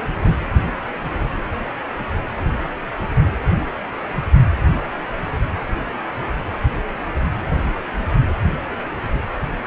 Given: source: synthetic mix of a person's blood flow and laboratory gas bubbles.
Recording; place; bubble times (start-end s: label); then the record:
Doppler ultrasound of blood flow; precordium
0.20-0.32 s: bubbles
From the record:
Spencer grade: 1 (occasional bubble signal discernible with the cardiac motion signal, with majority of cardiac periods free of bubbles); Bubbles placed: anywhere in the cardiac cycle